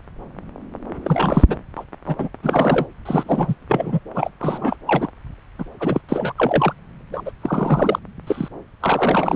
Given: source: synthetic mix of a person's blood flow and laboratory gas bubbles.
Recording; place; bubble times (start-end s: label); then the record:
Doppler ultrasound of blood flow; subclavian vein
1.04-1.44 s: bubbles
1.48-1.58 s: bubbles
1.76-1.85 s: bubbles
2.06-2.16 s: bubbles
2.18-2.28 s: bubbles
2.43-2.86 s: bubbles
3.05-3.54 s: bubbles
3.69-3.99 s: bubbles
4.14-4.29 s: bubbles
4.40-4.76 s: bubbles
4.87-5.10 s: bubbles
5.58-5.64 s: bubbles
5.79-6.01 s: bubbles
6.08-6.32 s: bubbles
6.36-6.73 s: bubbles
7.13-7.21 s: bubbles
7.25-7.31 s: bubbles
7.42-7.99 s: bubbles
8.26-8.48 s: bubbles
8.80-9.36 s: bubbles
From the record:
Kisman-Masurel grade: 332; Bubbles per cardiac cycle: rolling drumbeat, 9 or more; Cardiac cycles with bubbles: 50 to 99%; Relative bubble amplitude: moderate (0.250 to 0.450); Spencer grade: 3 (all of the cardiac periods contain showers or single bubble signals, but not dominating or overriding the cardiac motion signals); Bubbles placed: anywhere in the cardiac cycle